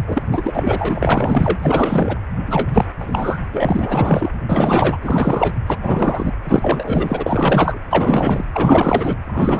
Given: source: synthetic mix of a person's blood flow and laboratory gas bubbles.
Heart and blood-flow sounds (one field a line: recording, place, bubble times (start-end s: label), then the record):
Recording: Doppler ultrasound of blood flow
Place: precordium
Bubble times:
0.07-2.18 s: bubbles
2.46-2.85 s: bubbles
2.98-3.39 s: bubbles
3.52-4.30 s: bubbles
4.49-4.99 s: bubbles
5.01-5.53 s: bubbles
5.67-5.77 s: bubbles
5.82-6.33 s: bubbles
6.43-7.79 s: bubbles
7.90-8.45 s: bubbles
8.53-9.16 s: bubbles
9.26-9.60 s: bubbles
From the record:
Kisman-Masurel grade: 444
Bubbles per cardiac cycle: continuous sound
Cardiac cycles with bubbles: 100%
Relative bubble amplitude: maximal (0.775 to 0.999)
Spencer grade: 4 (maximum detectable bubble signal sounding continuously throughout systole and diastole of every cardiac period, and overriding the amplitude of the normal cardiac signals)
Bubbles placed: anywhere in the cardiac cycle